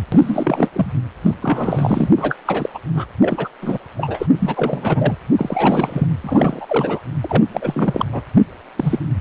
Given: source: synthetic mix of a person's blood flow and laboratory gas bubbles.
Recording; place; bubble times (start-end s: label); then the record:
Doppler ultrasound of blood flow; precordium
0.12-0.70 s: bubbles
0.72-0.93 s: bubbles
1.23-1.34 s: bubbles
1.41-2.09 s: bubbles
2.17-2.36 s: bubbles
2.45-2.69 s: bubbles
2.74-2.79 s: bubbles
2.94-3.06 s: bubbles
3.21-3.49 s: bubbles
3.61-3.78 s: bubbles
3.97-4.27 s: bubbles
4.39-5.16 s: bubbles
5.36-6.07 s: bubbles
6.21-7.01 s: bubbles
7.21-7.44 s: bubbles
7.52-8.05 s: bubbles
8.12-8.21 s: bubbles
8.76-8.99 s: bubbles
From the record:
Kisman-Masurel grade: 343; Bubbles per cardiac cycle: rolling drumbeat, 9 or more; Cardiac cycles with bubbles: 100%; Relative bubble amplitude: loud (0.450 to 0.775); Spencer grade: 3 (all of the cardiac periods contain showers or single bubble signals, but not dominating or overriding the cardiac motion signals); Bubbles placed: anywhere in the cardiac cycle